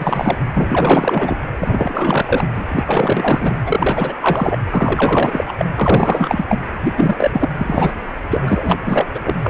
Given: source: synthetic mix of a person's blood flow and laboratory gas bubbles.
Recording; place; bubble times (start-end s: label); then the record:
Doppler ultrasound of blood flow; precordium
0.00-0.37 s: bubbles
0.53-1.41 s: bubbles
1.59-2.47 s: bubbles
2.54-2.63 s: bubbles
2.68-2.83 s: bubbles
2.87-3.56 s: bubbles
3.66-4.17 s: bubbles
4.21-4.58 s: bubbles
4.71-5.45 s: bubbles
5.47-5.54 s: bubbles
5.58-5.66 s: bubbles
5.76-6.61 s: bubbles
6.84-6.93 s: bubbles
6.96-7.49 s: bubbles
7.58-7.94 s: bubbles
8.30-8.77 s: bubbles
8.85-9.06 s: bubbles
9.14-9.20 s: bubbles
9.24-9.35 s: bubbles
9.42-9.50 s: bubbles
From the record:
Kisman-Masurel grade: 444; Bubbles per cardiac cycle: continuous sound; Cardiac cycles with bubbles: 100%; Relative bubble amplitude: maximal (0.775 to 0.999); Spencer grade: 4 (maximum detectable bubble signal sounding continuously throughout systole and diastole of every cardiac period, and overriding the amplitude of the normal cardiac signals); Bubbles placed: anywhere in the cardiac cycle